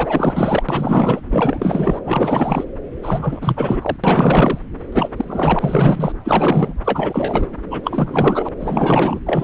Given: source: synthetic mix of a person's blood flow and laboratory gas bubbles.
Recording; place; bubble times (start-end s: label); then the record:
Doppler ultrasound of blood flow; subclavian vein
0.00-0.63 s: bubbles
0.69-1.21 s: bubbles
1.30-1.99 s: bubbles
2.04-2.65 s: bubbles
3.02-3.96 s: bubbles
4.04-4.59 s: bubbles
4.92-5.09 s: bubbles
5.17-6.12 s: bubbles
6.24-6.74 s: bubbles
6.84-7.46 s: bubbles
7.71-8.49 s: bubbles
8.60-9.21 s: bubbles
9.26-9.44 s: bubbles
From the record:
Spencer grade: 4 (maximum detectable bubble signal sounding continuously throughout systole and diastole of every cardiac period, and overriding the amplitude of the normal cardiac signals); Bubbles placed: anywhere in the cardiac cycle